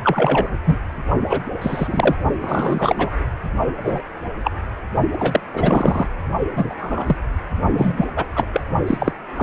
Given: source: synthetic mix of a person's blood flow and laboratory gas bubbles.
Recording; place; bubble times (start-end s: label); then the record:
Doppler ultrasound of blood flow; precordium
0.03-0.49 s: bubbles
0.65-0.78 s: bubbles
1.30-1.41 s: bubbles
1.61-2.15 s: bubbles
2.39-3.10 s: bubbles
3.83-4.03 s: bubbles
4.43-4.51 s: bubbles
5.12-5.40 s: bubbles
5.53-6.07 s: bubbles
6.54-6.74 s: bubbles
6.79-7.17 s: bubbles
7.73-8.06 s: bubbles
8.16-8.25 s: bubbles
8.35-8.45 s: bubbles
8.53-8.61 s: bubbles
8.87-9.12 s: bubbles
9.36-9.43 s: bubbles
From the record:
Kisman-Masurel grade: 243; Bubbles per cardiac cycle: several, 3 to 8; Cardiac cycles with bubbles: 100%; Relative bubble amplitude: loud (0.450 to 0.775); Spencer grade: 3 (all of the cardiac periods contain showers or single bubble signals, but not dominating or overriding the cardiac motion signals); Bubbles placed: only in the low amplitude regions of the cardiac cycle